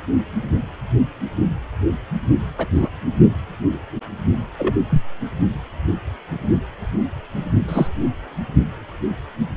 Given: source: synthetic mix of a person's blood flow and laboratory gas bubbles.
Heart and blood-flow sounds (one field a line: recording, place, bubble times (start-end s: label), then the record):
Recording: Doppler ultrasound of blood flow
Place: precordium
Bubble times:
2.58-2.67 s: bubbles
2.71-2.88 s: bubbles
4.58-4.73 s: bubbles
4.90-5.02 s: bubbles
7.68-7.87 s: bubbles
From the record:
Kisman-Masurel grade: 122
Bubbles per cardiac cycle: 1 to 2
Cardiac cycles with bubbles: 10 to 50%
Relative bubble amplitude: moderate (0.250 to 0.450)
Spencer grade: 2 (many but less than half of the cardiac periods contain bubble signals, singularly or in groups)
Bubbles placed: only in the low amplitude regions of the cardiac cycle